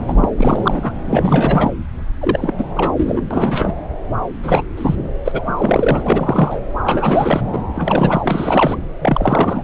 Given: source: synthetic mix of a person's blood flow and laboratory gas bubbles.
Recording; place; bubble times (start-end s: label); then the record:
Doppler ultrasound of blood flow; subclavian vein
0.00-0.29 s: bubbles
0.36-0.92 s: bubbles
1.05-1.72 s: bubbles
2.21-2.69 s: bubbles
2.76-2.92 s: bubbles
2.97-3.21 s: bubbles
3.30-3.75 s: bubbles
4.42-4.62 s: bubbles
4.77-4.96 s: bubbles
5.25-5.42 s: bubbles
5.47-6.62 s: bubbles
6.84-7.41 s: bubbles
7.52-7.63 s: bubbles
7.75-8.21 s: bubbles
8.23-8.78 s: bubbles
9.00-9.63 s: bubbles
From the record:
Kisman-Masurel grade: 343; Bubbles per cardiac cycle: rolling drumbeat, 9 or more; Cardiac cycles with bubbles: 100%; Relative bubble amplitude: loud (0.450 to 0.775); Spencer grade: 3 (all of the cardiac periods contain showers or single bubble signals, but not dominating or overriding the cardiac motion signals); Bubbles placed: anywhere in the cardiac cycle